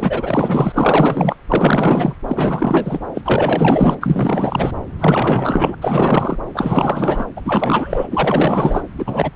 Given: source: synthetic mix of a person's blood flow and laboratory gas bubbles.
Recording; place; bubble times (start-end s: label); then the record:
Doppler ultrasound of blood flow; subclavian vein
0.00-1.35 s: bubbles
1.49-2.14 s: bubbles
2.27-2.99 s: bubbles
3.15-3.21 s: bubbles
3.24-4.71 s: bubbles
4.98-5.75 s: bubbles
5.81-6.38 s: bubbles
6.54-7.27 s: bubbles
7.36-7.41 s: bubbles
7.45-8.07 s: bubbles
8.11-8.86 s: bubbles
8.98-9.30 s: bubbles
From the record:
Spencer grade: 4 (maximum detectable bubble signal sounding continuously throughout systole and diastole of every cardiac period, and overriding the amplitude of the normal cardiac signals); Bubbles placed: anywhere in the cardiac cycle